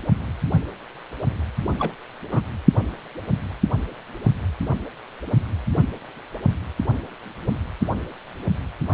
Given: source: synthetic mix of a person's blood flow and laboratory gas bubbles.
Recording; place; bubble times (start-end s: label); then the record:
Doppler ultrasound of blood flow; precordium
1.79-1.92 s: bubbles
2.31-2.40 s: bubbles
From the record:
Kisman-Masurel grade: 112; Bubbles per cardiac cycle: 1 to 2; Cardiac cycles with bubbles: 1 to 10%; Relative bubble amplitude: moderate (0.250 to 0.450); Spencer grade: 1 (occasional bubble signal discernible with the cardiac motion signal, with majority of cardiac periods free of bubbles); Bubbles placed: anywhere in the cardiac cycle